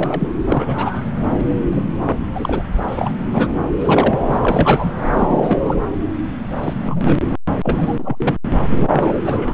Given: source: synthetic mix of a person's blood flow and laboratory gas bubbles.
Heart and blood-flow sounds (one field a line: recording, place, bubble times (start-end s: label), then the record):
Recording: Doppler ultrasound of blood flow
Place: subclavian vein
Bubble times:
0.00-0.29 s: bubbles
0.45-1.06 s: bubbles
1.48-1.56 s: bubbles
1.71-1.81 s: bubbles
2.34-2.62 s: bubbles
2.88-3.12 s: bubbles
3.15-3.52 s: bubbles
3.79-4.39 s: bubbles
4.45-4.91 s: bubbles
5.15-5.75 s: bubbles
6.63-6.74 s: bubbles
6.86-7.21 s: bubbles
7.63-7.96 s: bubbles
7.98-8.34 s: bubbles
8.70-9.13 s: bubbles
9.24-9.54 s: bubbles
From the record:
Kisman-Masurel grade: 232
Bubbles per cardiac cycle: several, 3 to 8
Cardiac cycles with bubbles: 50 to 99%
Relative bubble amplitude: moderate (0.250 to 0.450)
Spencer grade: 3 (all of the cardiac periods contain showers or single bubble signals, but not dominating or overriding the cardiac motion signals)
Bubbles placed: anywhere in the cardiac cycle